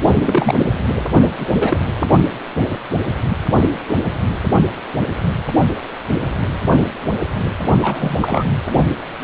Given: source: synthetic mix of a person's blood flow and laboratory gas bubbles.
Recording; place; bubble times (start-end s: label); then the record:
Doppler ultrasound of blood flow; precordium
0.22-0.59 s: bubbles
0.87-0.94 s: bubbles
1.38-1.48 s: bubbles
1.52-1.79 s: bubbles
7.82-8.17 s: bubbles
8.20-8.44 s: bubbles
From the record:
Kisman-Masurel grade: 222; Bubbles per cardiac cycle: several, 3 to 8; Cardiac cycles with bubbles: 10 to 50%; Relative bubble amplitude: moderate (0.250 to 0.450); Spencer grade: 2 (many but less than half of the cardiac periods contain bubble signals, singularly or in groups); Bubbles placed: only in the low amplitude regions of the cardiac cycle